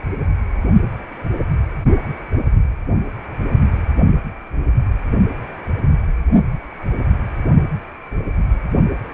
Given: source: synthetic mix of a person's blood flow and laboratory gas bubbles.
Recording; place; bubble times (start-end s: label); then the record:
Doppler ultrasound of blood flow; precordium
no bubbles
From the record:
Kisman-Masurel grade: 000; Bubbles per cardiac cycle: 0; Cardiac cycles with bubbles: 0%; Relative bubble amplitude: no bubbles discernible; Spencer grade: 0 (complete lack of bubble signals)